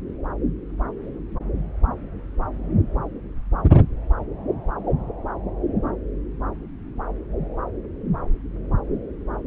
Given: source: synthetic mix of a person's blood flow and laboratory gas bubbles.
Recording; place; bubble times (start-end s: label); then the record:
Doppler ultrasound of blood flow; subclavian vein
no bubbles
From the record:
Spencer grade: 0 (complete lack of bubble signals)